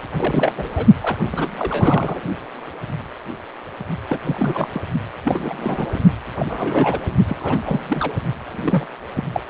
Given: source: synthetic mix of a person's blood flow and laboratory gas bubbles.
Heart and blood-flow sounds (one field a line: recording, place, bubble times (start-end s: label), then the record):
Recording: Doppler ultrasound of blood flow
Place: precordium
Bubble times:
0.17-0.53 s: bubbles
0.57-0.69 s: bubbles
0.77-0.86 s: bubbles
1.00-1.18 s: bubbles
1.32-1.51 s: bubbles
1.57-2.21 s: bubbles
4.08-4.18 s: bubbles
4.24-4.67 s: bubbles
4.74-4.81 s: bubbles
5.24-5.88 s: bubbles
5.93-5.99 s: bubbles
6.38-7.00 s: bubbles
7.28-8.12 s: bubbles
8.46-8.87 s: bubbles
9.15-9.24 s: bubbles
9.32-9.41 s: bubbles
From the record:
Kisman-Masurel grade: 332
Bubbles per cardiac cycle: rolling drumbeat, 9 or more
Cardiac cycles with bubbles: 50 to 99%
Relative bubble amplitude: moderate (0.250 to 0.450)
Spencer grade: 3 (all of the cardiac periods contain showers or single bubble signals, but not dominating or overriding the cardiac motion signals)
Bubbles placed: only in the low amplitude regions of the cardiac cycle